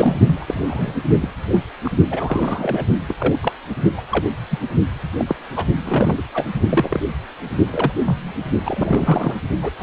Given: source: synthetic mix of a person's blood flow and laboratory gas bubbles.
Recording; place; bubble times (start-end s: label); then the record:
Doppler ultrasound of blood flow; precordium
0.00-0.18 s: bubbles
0.27-0.94 s: bubbles
1.21-1.30 s: bubbles
1.52-1.60 s: bubbles
1.85-1.90 s: bubbles
2.10-2.85 s: bubbles
3.08-3.15 s: bubbles
3.18-3.35 s: bubbles
3.42-3.52 s: bubbles
3.97-4.02 s: bubbles
4.11-4.27 s: bubbles
4.50-4.59 s: bubbles
5.17-5.24 s: bubbles
5.28-5.35 s: bubbles
5.55-5.65 s: bubbles
5.83-6.22 s: bubbles
6.34-6.49 s: bubbles
6.69-7.05 s: bubbles
7.71-7.92 s: bubbles
8.05-8.33 s: bubbles
8.64-9.36 s: bubbles
9.62-9.71 s: bubbles
9.79-9.83 s: bubbles
From the record:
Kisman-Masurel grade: 242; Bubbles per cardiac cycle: several, 3 to 8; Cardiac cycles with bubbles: 100%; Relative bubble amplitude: moderate (0.250 to 0.450); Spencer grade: 3 (all of the cardiac periods contain showers or single bubble signals, but not dominating or overriding the cardiac motion signals); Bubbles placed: only in the low amplitude regions of the cardiac cycle